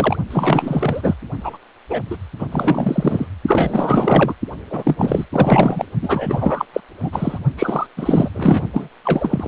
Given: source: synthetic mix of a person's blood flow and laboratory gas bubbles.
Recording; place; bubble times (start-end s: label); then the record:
Doppler ultrasound of blood flow; precordium
0.00-0.17 s: bubbles
0.31-1.14 s: bubbles
1.40-1.57 s: bubbles
1.89-2.00 s: bubbles
2.10-2.17 s: bubbles
2.39-2.46 s: bubbles
2.52-3.27 s: bubbles
3.47-4.33 s: bubbles
4.70-4.96 s: bubbles
4.99-5.26 s: bubbles
5.32-5.85 s: bubbles
6.01-6.66 s: bubbles
6.73-6.81 s: bubbles
7.02-7.40 s: bubbles
7.57-7.87 s: bubbles
7.96-8.29 s: bubbles
8.34-8.62 s: bubbles
8.73-8.88 s: bubbles
9.04-9.48 s: bubbles
From the record:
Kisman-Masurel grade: 444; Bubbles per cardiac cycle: continuous sound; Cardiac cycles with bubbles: 100%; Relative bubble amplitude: maximal (0.775 to 0.999); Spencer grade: 4 (maximum detectable bubble signal sounding continuously throughout systole and diastole of every cardiac period, and overriding the amplitude of the normal cardiac signals); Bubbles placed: only in the low amplitude regions of the cardiac cycle